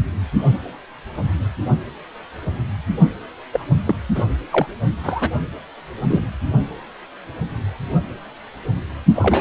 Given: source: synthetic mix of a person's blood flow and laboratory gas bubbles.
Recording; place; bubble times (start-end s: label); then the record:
Doppler ultrasound of blood flow; precordium
3.53-3.66 s: bubbles
3.86-3.96 s: bubbles
4.15-4.25 s: bubbles
4.52-4.67 s: bubbles
5.03-5.30 s: bubbles
6.08-6.28 s: bubbles
9.14-9.41 s: bubbles
From the record:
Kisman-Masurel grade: 222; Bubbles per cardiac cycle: several, 3 to 8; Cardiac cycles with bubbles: 10 to 50%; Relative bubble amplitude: moderate (0.250 to 0.450); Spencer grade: 2 (many but less than half of the cardiac periods contain bubble signals, singularly or in groups); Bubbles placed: only in the low amplitude regions of the cardiac cycle